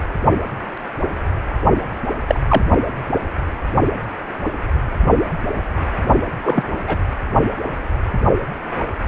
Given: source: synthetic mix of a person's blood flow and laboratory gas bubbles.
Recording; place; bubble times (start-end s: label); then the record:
Doppler ultrasound of blood flow; precordium
2.28-2.40 s: bubbles
2.49-2.62 s: bubbles
6.44-6.63 s: bubbles
6.87-6.98 s: bubbles
From the record:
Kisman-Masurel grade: 123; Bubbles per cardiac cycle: 1 to 2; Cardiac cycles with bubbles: 10 to 50%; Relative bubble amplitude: loud (0.450 to 0.775); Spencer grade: 2 (many but less than half of the cardiac periods contain bubble signals, singularly or in groups); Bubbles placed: only in the low amplitude regions of the cardiac cycle